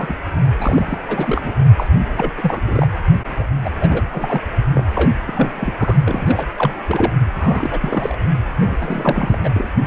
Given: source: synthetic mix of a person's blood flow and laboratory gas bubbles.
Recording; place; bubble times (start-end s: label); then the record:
Doppler ultrasound of blood flow; precordium
0.00-0.15 s: bubbles
0.59-0.98 s: bubbles
1.07-1.53 s: bubbles
1.76-1.88 s: bubbles
2.16-2.32 s: bubbles
2.37-2.61 s: bubbles
2.66-2.87 s: bubbles
3.38-3.44 s: bubbles
3.64-3.69 s: bubbles
3.79-4.03 s: bubbles
4.12-4.41 s: bubbles
4.75-4.85 s: bubbles
4.95-5.10 s: bubbles
5.27-5.52 s: bubbles
5.56-5.74 s: bubbles
5.78-5.96 s: bubbles
6.06-6.49 s: bubbles
6.58-6.74 s: bubbles
6.88-7.12 s: bubbles
7.39-8.16 s: bubbles
8.60-8.76 s: bubbles
8.80-9.38 s: bubbles
9.44-9.49 s: bubbles
9.53-9.67 s: bubbles
9.83-9.87 s: bubbles
From the record:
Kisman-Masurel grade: 342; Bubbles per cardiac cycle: rolling drumbeat, 9 or more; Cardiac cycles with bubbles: 100%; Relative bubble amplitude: moderate (0.250 to 0.450); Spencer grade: 3 (all of the cardiac periods contain showers or single bubble signals, but not dominating or overriding the cardiac motion signals); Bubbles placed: only in the low amplitude regions of the cardiac cycle